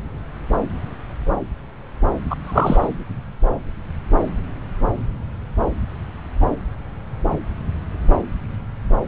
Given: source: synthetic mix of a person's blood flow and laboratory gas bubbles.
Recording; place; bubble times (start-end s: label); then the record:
Doppler ultrasound of blood flow; subclavian vein
2.30-2.35 s: bubbles
2.44-2.87 s: bubbles
From the record:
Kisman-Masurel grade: 213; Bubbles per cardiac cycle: several, 3 to 8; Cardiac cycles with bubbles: 1 to 10%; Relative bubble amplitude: loud (0.450 to 0.775); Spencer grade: 1 (occasional bubble signal discernible with the cardiac motion signal, with majority of cardiac periods free of bubbles); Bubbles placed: anywhere in the cardiac cycle